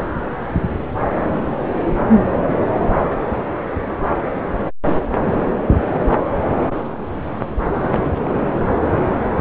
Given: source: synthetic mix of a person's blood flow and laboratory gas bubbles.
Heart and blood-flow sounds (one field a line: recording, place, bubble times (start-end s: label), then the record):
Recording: Doppler ultrasound of blood flow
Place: subclavian vein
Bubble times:
7.87-8.34 s: bubbles
From the record:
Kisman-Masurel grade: 211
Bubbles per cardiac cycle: several, 3 to 8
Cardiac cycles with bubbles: 1 to 10%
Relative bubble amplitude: barely perceptible (0.100 to 0.250)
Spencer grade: 1 (occasional bubble signal discernible with the cardiac motion signal, with majority of cardiac periods free of bubbles)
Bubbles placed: anywhere in the cardiac cycle